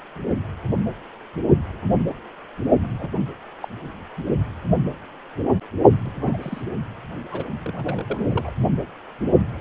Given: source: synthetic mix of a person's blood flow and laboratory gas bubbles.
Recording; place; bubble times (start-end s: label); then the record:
Doppler ultrasound of blood flow; precordium
2.82-2.89 s: bubbles
2.99-3.11 s: bubbles
3.60-3.68 s: bubbles
6.04-6.12 s: bubbles
6.21-6.37 s: bubbles
6.42-6.62 s: bubbles
7.32-7.44 s: bubbles
7.66-8.52 s: bubbles
From the record:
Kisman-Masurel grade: 221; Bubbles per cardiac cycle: several, 3 to 8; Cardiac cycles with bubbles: 10 to 50%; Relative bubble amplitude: barely perceptible (0.100 to 0.250); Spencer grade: 2 (many but less than half of the cardiac periods contain bubble signals, singularly or in groups); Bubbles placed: only in the low amplitude regions of the cardiac cycle